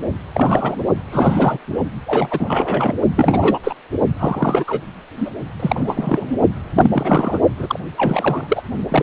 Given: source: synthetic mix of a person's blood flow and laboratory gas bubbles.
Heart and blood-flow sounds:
Doppler ultrasound of blood flow; precordium
0.34-0.84 s: bubbles
1.09-1.58 s: bubbles
2.06-2.94 s: bubbles
3.15-3.59 s: bubbles
3.64-3.74 s: bubbles
4.19-4.64 s: bubbles
4.67-4.81 s: bubbles
5.16-5.30 s: bubbles
5.60-6.34 s: bubbles
6.76-7.39 s: bubbles
7.59-7.79 s: bubbles
7.97-8.62 s: bubbles
8.88-9.03 s: bubbles
From the record:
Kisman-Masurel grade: 343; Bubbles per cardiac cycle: rolling drumbeat, 9 or more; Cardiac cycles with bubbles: 100%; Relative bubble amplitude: loud (0.450 to 0.775); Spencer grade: 3 (all of the cardiac periods contain showers or single bubble signals, but not dominating or overriding the cardiac motion signals); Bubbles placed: only in the low amplitude regions of the cardiac cycle

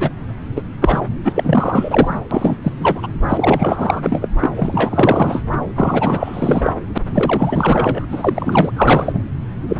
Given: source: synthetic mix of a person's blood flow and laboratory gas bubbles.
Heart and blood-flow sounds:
Doppler ultrasound of blood flow; subclavian vein
0.00-0.10 s: bubbles
0.55-0.62 s: bubbles
0.81-1.01 s: bubbles
1.24-2.19 s: bubbles
2.31-2.57 s: bubbles
2.62-2.72 s: bubbles
2.80-3.07 s: bubbles
3.28-4.29 s: bubbles
4.41-4.52 s: bubbles
4.56-5.43 s: bubbles
5.75-6.73 s: bubbles
6.95-6.98 s: bubbles
7.06-8.06 s: bubbles
8.11-8.72 s: bubbles
8.77-9.23 s: bubbles
9.68-9.77 s: bubbles
From the record:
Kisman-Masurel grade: 444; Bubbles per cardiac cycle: continuous sound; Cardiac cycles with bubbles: 100%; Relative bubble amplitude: maximal (0.775 to 0.999); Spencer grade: 4 (maximum detectable bubble signal sounding continuously throughout systole and diastole of every cardiac period, and overriding the amplitude of the normal cardiac signals); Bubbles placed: anywhere in the cardiac cycle

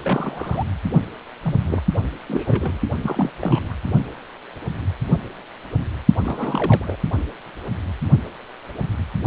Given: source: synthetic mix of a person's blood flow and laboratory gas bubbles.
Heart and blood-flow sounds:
Doppler ultrasound of blood flow; precordium
0.02-0.64 s: bubbles
1.43-1.82 s: bubbles
2.27-2.79 s: bubbles
3.02-3.31 s: bubbles
3.42-3.75 s: bubbles
6.18-6.96 s: bubbles
From the record:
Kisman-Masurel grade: 232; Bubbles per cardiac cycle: several, 3 to 8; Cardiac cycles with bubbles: 50 to 99%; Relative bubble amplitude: moderate (0.250 to 0.450); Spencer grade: 3 (all of the cardiac periods contain showers or single bubble signals, but not dominating or overriding the cardiac motion signals); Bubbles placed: only in the low amplitude regions of the cardiac cycle

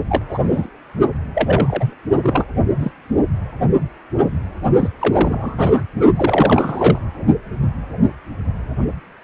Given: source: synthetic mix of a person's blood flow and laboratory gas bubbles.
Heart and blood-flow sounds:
Doppler ultrasound of blood flow; precordium
0.09-0.24 s: bubbles
0.29-0.39 s: bubbles
0.52-0.69 s: bubbles
1.34-1.94 s: bubbles
2.23-2.45 s: bubbles
2.79-2.92 s: bubbles
4.80-4.89 s: bubbles
4.99-5.82 s: bubbles
6.16-6.99 s: bubbles
From the record:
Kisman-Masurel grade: 232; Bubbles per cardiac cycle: several, 3 to 8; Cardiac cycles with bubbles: 50 to 99%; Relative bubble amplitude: moderate (0.250 to 0.450); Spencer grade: 3 (all of the cardiac periods contain showers or single bubble signals, but not dominating or overriding the cardiac motion signals); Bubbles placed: only in the low amplitude regions of the cardiac cycle

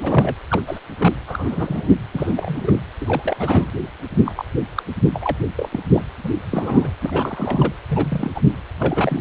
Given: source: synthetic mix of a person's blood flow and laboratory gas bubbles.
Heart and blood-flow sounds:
Doppler ultrasound of blood flow; precordium
0.00-0.35 s: bubbles
0.50-0.61 s: bubbles
0.67-0.79 s: bubbles
0.97-1.14 s: bubbles
1.27-1.88 s: bubbles
2.15-2.80 s: bubbles
3.00-3.36 s: bubbles
3.39-3.68 s: bubbles
4.25-4.32 s: bubbles
4.37-4.45 s: bubbles
4.75-4.83 s: bubbles
5.13-5.37 s: bubbles
5.58-5.69 s: bubbles
5.72-5.80 s: bubbles
5.94-6.04 s: bubbles
6.24-6.29 s: bubbles
6.51-6.91 s: bubbles
7.01-7.73 s: bubbles
7.89-8.31 s: bubbles
8.34-8.41 s: bubbles
8.80-9.21 s: bubbles
From the record:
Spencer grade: 3 (all of the cardiac periods contain showers or single bubble signals, but not dominating or overriding the cardiac motion signals); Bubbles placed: anywhere in the cardiac cycle

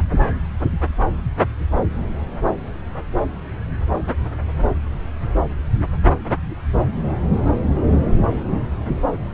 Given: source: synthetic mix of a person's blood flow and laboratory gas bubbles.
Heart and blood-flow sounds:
Doppler ultrasound of blood flow; subclavian vein
no bubbles
From the record:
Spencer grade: 0 (complete lack of bubble signals)

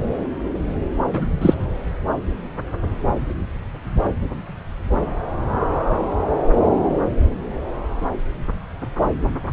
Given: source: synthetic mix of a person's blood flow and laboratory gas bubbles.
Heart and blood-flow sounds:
Doppler ultrasound of blood flow; subclavian vein
1.13-1.27 s: bubbles
1.41-1.54 s: bubbles
From the record:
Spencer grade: 1 (occasional bubble signal discernible with the cardiac motion signal, with majority of cardiac periods free of bubbles); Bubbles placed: anywhere in the cardiac cycle

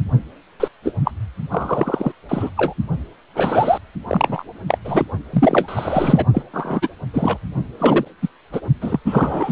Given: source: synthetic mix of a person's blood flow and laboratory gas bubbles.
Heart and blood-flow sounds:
Doppler ultrasound of blood flow; precordium
0.59-0.68 s: bubbles
0.84-0.93 s: bubbles
1.04-1.11 s: bubbles
1.51-2.12 s: bubbles
2.29-2.50 s: bubbles
2.57-2.74 s: bubbles
3.34-3.79 s: bubbles
4.08-4.43 s: bubbles
4.67-4.78 s: bubbles
4.84-5.06 s: bubbles
5.33-6.26 s: bubbles
6.33-6.42 s: bubbles
6.53-6.88 s: bubbles
7.13-7.38 s: bubbles
7.79-8.05 s: bubbles
8.22-8.28 s: bubbles
8.52-8.60 s: bubbles
8.81-8.99 s: bubbles
9.05-9.52 s: bubbles
From the record:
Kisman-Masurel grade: 243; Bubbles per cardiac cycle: several, 3 to 8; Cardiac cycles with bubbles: 100%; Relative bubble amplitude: loud (0.450 to 0.775); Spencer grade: 3 (all of the cardiac periods contain showers or single bubble signals, but not dominating or overriding the cardiac motion signals); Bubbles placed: only in the low amplitude regions of the cardiac cycle

